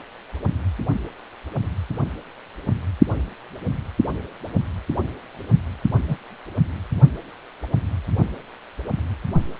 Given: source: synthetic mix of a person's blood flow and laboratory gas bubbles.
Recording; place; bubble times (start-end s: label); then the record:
Doppler ultrasound of blood flow; precordium
6.08-6.17 s: bubbles
From the record:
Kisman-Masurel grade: 112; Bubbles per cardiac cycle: 1 to 2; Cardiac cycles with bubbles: 1 to 10%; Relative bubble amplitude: moderate (0.250 to 0.450); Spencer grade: 1 (occasional bubble signal discernible with the cardiac motion signal, with majority of cardiac periods free of bubbles); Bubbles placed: only in the low amplitude regions of the cardiac cycle